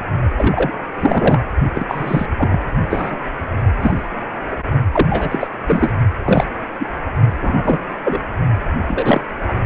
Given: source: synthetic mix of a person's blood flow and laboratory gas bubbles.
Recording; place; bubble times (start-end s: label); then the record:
Doppler ultrasound of blood flow; precordium
0.00-0.02 s: bubbles
0.37-0.72 s: bubbles
1.00-1.40 s: bubbles
1.75-1.86 s: bubbles
1.88-2.26 s: bubbles
2.38-2.58 s: bubbles
2.90-3.16 s: bubbles
3.81-4.08 s: bubbles
4.92-5.50 s: bubbles
5.66-5.92 s: bubbles
6.25-6.44 s: bubbles
6.79-6.88 s: bubbles
7.41-7.79 s: bubbles
8.04-8.21 s: bubbles
8.88-9.21 s: bubbles
9.48-9.54 s: bubbles
From the record:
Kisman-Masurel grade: 243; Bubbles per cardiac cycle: several, 3 to 8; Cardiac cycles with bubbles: 100%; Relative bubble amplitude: loud (0.450 to 0.775); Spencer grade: 3 (all of the cardiac periods contain showers or single bubble signals, but not dominating or overriding the cardiac motion signals); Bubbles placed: only in the low amplitude regions of the cardiac cycle